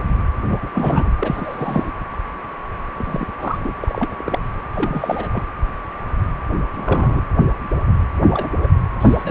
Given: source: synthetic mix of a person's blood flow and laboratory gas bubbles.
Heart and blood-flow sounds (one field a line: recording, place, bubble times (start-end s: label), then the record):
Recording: Doppler ultrasound of blood flow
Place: precordium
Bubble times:
0.49-0.58 s: bubbles
0.62-0.68 s: bubbles
0.73-1.10 s: bubbles
1.19-1.91 s: bubbles
2.95-3.27 s: bubbles
3.39-3.71 s: bubbles
3.83-4.48 s: bubbles
4.73-5.30 s: bubbles
5.33-5.42 s: bubbles
6.75-7.21 s: bubbles
8.17-8.50 s: bubbles
8.61-8.67 s: bubbles
8.99-9.31 s: bubbles
From the record:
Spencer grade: 3 (all of the cardiac periods contain showers or single bubble signals, but not dominating or overriding the cardiac motion signals)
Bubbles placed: anywhere in the cardiac cycle